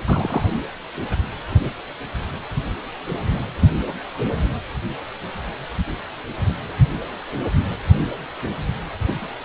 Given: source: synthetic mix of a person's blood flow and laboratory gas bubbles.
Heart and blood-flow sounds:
Doppler ultrasound of blood flow; precordium
0.05-0.44 s: bubbles
1.51-1.69 s: bubbles
8.98-9.28 s: bubbles
From the record:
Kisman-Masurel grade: 122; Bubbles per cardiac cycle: 1 to 2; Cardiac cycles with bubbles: 10 to 50%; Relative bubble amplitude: moderate (0.250 to 0.450); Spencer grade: 2 (many but less than half of the cardiac periods contain bubble signals, singularly or in groups); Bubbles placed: anywhere in the cardiac cycle

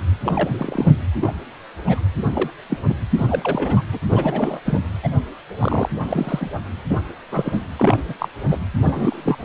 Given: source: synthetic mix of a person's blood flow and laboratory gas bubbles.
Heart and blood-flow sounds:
Doppler ultrasound of blood flow; precordium
0.23-0.94 s: bubbles
1.21-1.32 s: bubbles
1.87-2.00 s: bubbles
2.34-2.50 s: bubbles
2.69-2.77 s: bubbles
2.89-2.94 s: bubbles
3.17-3.82 s: bubbles
3.92-3.99 s: bubbles
4.08-4.60 s: bubbles
4.65-4.79 s: bubbles
5.03-5.09 s: bubbles
5.59-5.88 s: bubbles
6.05-6.50 s: bubbles
6.89-6.99 s: bubbles
7.32-7.59 s: bubbles
7.76-8.00 s: bubbles
8.08-8.14 s: bubbles
8.19-8.28 s: bubbles
8.49-8.58 s: bubbles
8.79-9.45 s: bubbles
From the record:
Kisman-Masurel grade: 242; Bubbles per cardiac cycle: several, 3 to 8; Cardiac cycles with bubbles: 100%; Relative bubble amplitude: moderate (0.250 to 0.450); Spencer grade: 3 (all of the cardiac periods contain showers or single bubble signals, but not dominating or overriding the cardiac motion signals); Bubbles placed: anywhere in the cardiac cycle

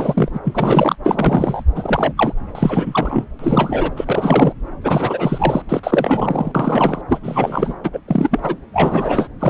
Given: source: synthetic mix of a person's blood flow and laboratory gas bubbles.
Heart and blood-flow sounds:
Doppler ultrasound of blood flow; subclavian vein
0.00-0.29 s: bubbles
0.33-0.39 s: bubbles
0.44-0.95 s: bubbles
1.03-1.63 s: bubbles
1.75-2.13 s: bubbles
2.17-2.32 s: bubbles
2.54-3.25 s: bubbles
3.39-3.91 s: bubbles
3.96-4.53 s: bubbles
4.83-5.62 s: bubbles
5.68-6.51 s: bubbles
6.54-7.01 s: bubbles
7.09-7.20 s: bubbles
7.22-7.75 s: bubbles
7.83-7.91 s: bubbles
7.93-8.00 s: bubbles
8.08-8.40 s: bubbles
8.42-8.56 s: bubbles
8.73-9.28 s: bubbles
9.39-9.50 s: bubbles
From the record:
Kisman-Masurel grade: 343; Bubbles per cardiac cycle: rolling drumbeat, 9 or more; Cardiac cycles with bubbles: 100%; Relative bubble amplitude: loud (0.450 to 0.775); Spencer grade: 3 (all of the cardiac periods contain showers or single bubble signals, but not dominating or overriding the cardiac motion signals); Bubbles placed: anywhere in the cardiac cycle

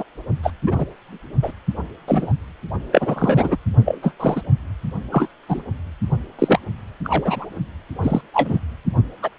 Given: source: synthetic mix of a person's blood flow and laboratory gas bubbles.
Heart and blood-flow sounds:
Doppler ultrasound of blood flow; precordium
0.00-0.03 s: bubbles
0.43-0.51 s: bubbles
0.66-0.85 s: bubbles
1.42-1.52 s: bubbles
2.07-2.33 s: bubbles
2.92-3.57 s: bubbles
3.85-3.99 s: bubbles
4.02-4.12 s: bubbles
4.20-4.42 s: bubbles
5.12-5.28 s: bubbles
5.48-5.62 s: bubbles
6.38-6.59 s: bubbles
7.04-7.46 s: bubbles
8.01-8.21 s: bubbles
8.33-8.58 s: bubbles
9.22-9.29 s: bubbles
From the record:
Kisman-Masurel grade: 243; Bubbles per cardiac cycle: several, 3 to 8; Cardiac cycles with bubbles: 100%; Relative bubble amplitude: loud (0.450 to 0.775); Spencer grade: 3 (all of the cardiac periods contain showers or single bubble signals, but not dominating or overriding the cardiac motion signals); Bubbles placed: only in the low amplitude regions of the cardiac cycle

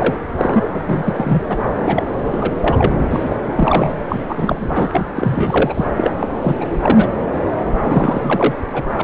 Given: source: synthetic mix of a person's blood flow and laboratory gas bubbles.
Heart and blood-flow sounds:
Doppler ultrasound of blood flow; subclavian vein
0.00-0.16 s: bubbles
0.38-0.69 s: bubbles
0.75-1.43 s: bubbles
1.50-1.58 s: bubbles
1.84-2.04 s: bubbles
2.25-3.06 s: bubbles
3.11-3.36 s: bubbles
3.56-3.97 s: bubbles
4.09-4.88 s: bubbles
4.91-5.06 s: bubbles
5.15-5.86 s: bubbles
5.96-6.15 s: bubbles
6.21-6.28 s: bubbles
6.41-6.54 s: bubbles
6.61-6.65 s: bubbles
6.83-7.07 s: bubbles
7.81-8.55 s: bubbles
8.73-9.02 s: bubbles
From the record:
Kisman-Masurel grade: 342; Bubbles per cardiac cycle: rolling drumbeat, 9 or more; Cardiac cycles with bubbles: 100%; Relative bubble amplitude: moderate (0.250 to 0.450); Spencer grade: 3 (all of the cardiac periods contain showers or single bubble signals, but not dominating or overriding the cardiac motion signals); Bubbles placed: anywhere in the cardiac cycle

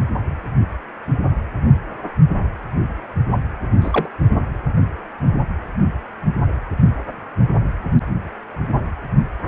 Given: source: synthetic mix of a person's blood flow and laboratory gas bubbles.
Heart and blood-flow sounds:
Doppler ultrasound of blood flow; precordium
3.81-4.08 s: bubbles
From the record:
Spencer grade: 1 (occasional bubble signal discernible with the cardiac motion signal, with majority of cardiac periods free of bubbles); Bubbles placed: only in the low amplitude regions of the cardiac cycle

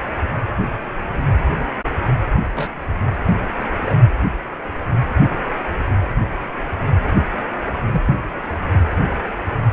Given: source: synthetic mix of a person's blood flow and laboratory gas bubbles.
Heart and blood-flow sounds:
Doppler ultrasound of blood flow; precordium
2.54-2.72 s: bubbles
3.85-3.97 s: bubbles
7.93-8.15 s: bubbles
From the record:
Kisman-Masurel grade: 122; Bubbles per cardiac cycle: 1 to 2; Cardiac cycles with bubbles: 10 to 50%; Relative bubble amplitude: moderate (0.250 to 0.450); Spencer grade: 2 (many but less than half of the cardiac periods contain bubble signals, singularly or in groups); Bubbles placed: anywhere in the cardiac cycle

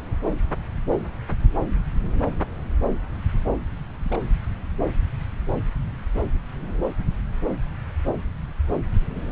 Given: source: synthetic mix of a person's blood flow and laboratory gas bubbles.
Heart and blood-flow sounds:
Doppler ultrasound of blood flow; subclavian vein
4.04-4.19 s: bubbles
From the record:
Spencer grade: 2 (many but less than half of the cardiac periods contain bubble signals, singularly or in groups); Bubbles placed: anywhere in the cardiac cycle

